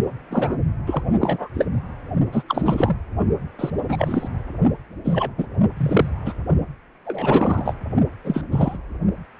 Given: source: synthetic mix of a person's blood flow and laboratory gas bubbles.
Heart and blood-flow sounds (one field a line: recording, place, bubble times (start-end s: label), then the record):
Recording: Doppler ultrasound of blood flow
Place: precordium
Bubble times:
0.30-0.56 s: bubbles
0.86-1.03 s: bubbles
1.20-1.50 s: bubbles
1.54-1.66 s: bubbles
2.32-2.44 s: bubbles
2.48-2.96 s: bubbles
3.59-3.70 s: bubbles
3.88-4.28 s: bubbles
5.04-5.31 s: bubbles
5.38-5.46 s: bubbles
5.77-6.09 s: bubbles
6.25-6.33 s: bubbles
7.05-7.75 s: bubbles
8.24-8.43 s: bubbles
8.51-8.78 s: bubbles
From the record:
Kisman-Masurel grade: 243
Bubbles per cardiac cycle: several, 3 to 8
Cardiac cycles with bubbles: 100%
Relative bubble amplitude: loud (0.450 to 0.775)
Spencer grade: 3 (all of the cardiac periods contain showers or single bubble signals, but not dominating or overriding the cardiac motion signals)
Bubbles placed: only in the low amplitude regions of the cardiac cycle